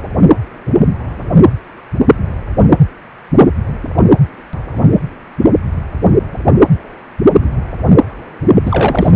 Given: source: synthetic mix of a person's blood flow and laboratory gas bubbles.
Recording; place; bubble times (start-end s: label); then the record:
Doppler ultrasound of blood flow; precordium
8.65-9.12 s: bubbles
From the record:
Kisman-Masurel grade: 213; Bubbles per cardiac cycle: several, 3 to 8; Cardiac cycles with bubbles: 1 to 10%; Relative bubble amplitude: loud (0.450 to 0.775); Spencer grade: 1 (occasional bubble signal discernible with the cardiac motion signal, with majority of cardiac periods free of bubbles); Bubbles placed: anywhere in the cardiac cycle